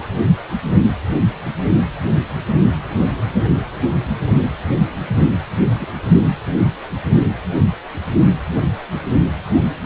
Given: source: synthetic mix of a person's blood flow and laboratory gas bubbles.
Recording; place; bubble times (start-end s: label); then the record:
Doppler ultrasound of blood flow; precordium
5.78-5.88 s: bubbles
From the record:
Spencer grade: 1 (occasional bubble signal discernible with the cardiac motion signal, with majority of cardiac periods free of bubbles); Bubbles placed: anywhere in the cardiac cycle